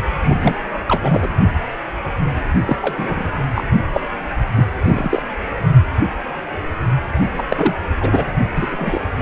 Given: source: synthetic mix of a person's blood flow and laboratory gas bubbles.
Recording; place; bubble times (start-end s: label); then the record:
Doppler ultrasound of blood flow; precordium
0.24-0.58 s: bubbles
0.88-1.27 s: bubbles
2.65-2.77 s: bubbles
2.81-3.31 s: bubbles
3.55-3.63 s: bubbles
3.94-4.00 s: bubbles
4.57-4.65 s: bubbles
4.85-5.22 s: bubbles
7.37-7.44 s: bubbles
7.50-7.75 s: bubbles
8.00-8.26 s: bubbles
8.55-9.00 s: bubbles
9.18-9.21 s: bubbles
From the record:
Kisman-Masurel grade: 233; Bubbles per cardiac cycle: several, 3 to 8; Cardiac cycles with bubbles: 50 to 99%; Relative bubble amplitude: loud (0.450 to 0.775); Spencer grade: 3 (all of the cardiac periods contain showers or single bubble signals, but not dominating or overriding the cardiac motion signals); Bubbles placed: only in the low amplitude regions of the cardiac cycle